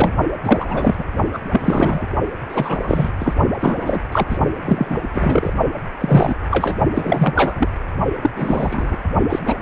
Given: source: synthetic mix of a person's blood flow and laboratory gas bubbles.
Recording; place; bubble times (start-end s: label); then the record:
Doppler ultrasound of blood flow; precordium
0.00-0.14 s: bubbles
0.44-1.04 s: bubbles
1.32-1.39 s: bubbles
1.52-2.07 s: bubbles
2.49-3.10 s: bubbles
3.19-3.33 s: bubbles
3.60-4.00 s: bubbles
4.12-4.38 s: bubbles
4.64-5.08 s: bubbles
5.12-5.53 s: bubbles
6.00-6.35 s: bubbles
6.50-6.77 s: bubbles
6.95-7.68 s: bubbles
8.21-8.30 s: bubbles
8.36-8.96 s: bubbles
9.29-9.39 s: bubbles
9.46-9.54 s: bubbles
9.60-9.62 s: bubbles
From the record:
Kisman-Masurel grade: 343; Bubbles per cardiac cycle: rolling drumbeat, 9 or more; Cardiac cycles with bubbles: 100%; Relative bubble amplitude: loud (0.450 to 0.775); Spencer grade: 3 (all of the cardiac periods contain showers or single bubble signals, but not dominating or overriding the cardiac motion signals); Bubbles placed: only in the low amplitude regions of the cardiac cycle